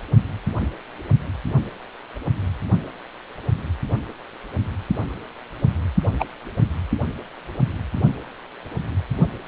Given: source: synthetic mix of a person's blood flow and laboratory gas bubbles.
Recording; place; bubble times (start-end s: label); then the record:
Doppler ultrasound of blood flow; precordium
6.19-6.26 s: bubbles
From the record:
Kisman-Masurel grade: 112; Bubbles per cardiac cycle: 1 to 2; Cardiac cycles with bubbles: 1 to 10%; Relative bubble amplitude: moderate (0.250 to 0.450); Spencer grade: 1 (occasional bubble signal discernible with the cardiac motion signal, with majority of cardiac periods free of bubbles); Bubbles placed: only in the low amplitude regions of the cardiac cycle